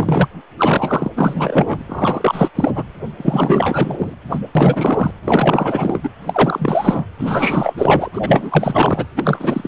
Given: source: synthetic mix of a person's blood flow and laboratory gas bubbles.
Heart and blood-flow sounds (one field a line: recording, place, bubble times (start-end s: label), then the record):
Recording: Doppler ultrasound of blood flow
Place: precordium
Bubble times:
0.00-0.28 s: bubbles
0.59-1.10 s: bubbles
1.16-1.81 s: bubbles
1.88-2.50 s: bubbles
2.55-2.71 s: bubbles
2.75-2.83 s: bubbles
3.17-4.16 s: bubbles
4.30-4.39 s: bubbles
4.55-5.12 s: bubbles
5.24-6.00 s: bubbles
6.03-6.10 s: bubbles
6.26-7.05 s: bubbles
7.19-7.74 s: bubbles
7.78-8.10 s: bubbles
8.12-8.19 s: bubbles
8.22-9.07 s: bubbles
9.15-9.68 s: bubbles
From the record:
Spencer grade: 4 (maximum detectable bubble signal sounding continuously throughout systole and diastole of every cardiac period, and overriding the amplitude of the normal cardiac signals)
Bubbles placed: anywhere in the cardiac cycle